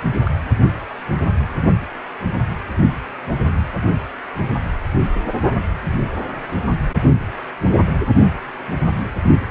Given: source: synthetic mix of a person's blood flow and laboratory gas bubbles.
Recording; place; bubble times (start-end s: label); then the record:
Doppler ultrasound of blood flow; precordium
0.25-0.31 s: bubbles
From the record:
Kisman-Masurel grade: 111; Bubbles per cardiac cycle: 1 to 2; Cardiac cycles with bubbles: 1 to 10%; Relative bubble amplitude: barely perceptible (0.100 to 0.250); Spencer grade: 1 (occasional bubble signal discernible with the cardiac motion signal, with majority of cardiac periods free of bubbles); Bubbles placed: only in the low amplitude regions of the cardiac cycle